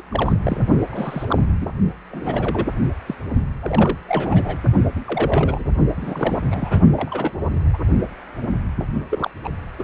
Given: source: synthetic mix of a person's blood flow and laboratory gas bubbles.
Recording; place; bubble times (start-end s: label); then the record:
Doppler ultrasound of blood flow; precordium
0.10-0.37 s: bubbles
0.44-0.61 s: bubbles
0.91-1.38 s: bubbles
1.59-1.68 s: bubbles
2.10-2.68 s: bubbles
3.06-3.15 s: bubbles
3.62-3.97 s: bubbles
4.07-4.58 s: bubbles
4.96-5.00 s: bubbles
5.05-5.65 s: bubbles
5.97-6.41 s: bubbles
6.50-6.79 s: bubbles
6.96-7.34 s: bubbles
7.73-7.77 s: bubbles
9.11-9.30 s: bubbles
9.44-9.49 s: bubbles
9.79-9.84 s: bubbles
From the record:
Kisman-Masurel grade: 232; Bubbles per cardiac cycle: several, 3 to 8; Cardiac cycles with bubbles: 50 to 99%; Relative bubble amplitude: moderate (0.250 to 0.450); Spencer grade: 3 (all of the cardiac periods contain showers or single bubble signals, but not dominating or overriding the cardiac motion signals); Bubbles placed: only in the low amplitude regions of the cardiac cycle